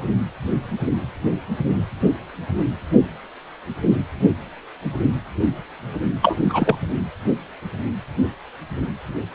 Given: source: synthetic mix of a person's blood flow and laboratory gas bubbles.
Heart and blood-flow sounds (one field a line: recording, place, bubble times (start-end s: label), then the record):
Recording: Doppler ultrasound of blood flow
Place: precordium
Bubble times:
6.22-6.36 s: bubbles
6.48-6.75 s: bubbles
From the record:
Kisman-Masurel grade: 213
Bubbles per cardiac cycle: several, 3 to 8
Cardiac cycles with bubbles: 1 to 10%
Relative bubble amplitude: loud (0.450 to 0.775)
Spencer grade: 1 (occasional bubble signal discernible with the cardiac motion signal, with majority of cardiac periods free of bubbles)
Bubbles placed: anywhere in the cardiac cycle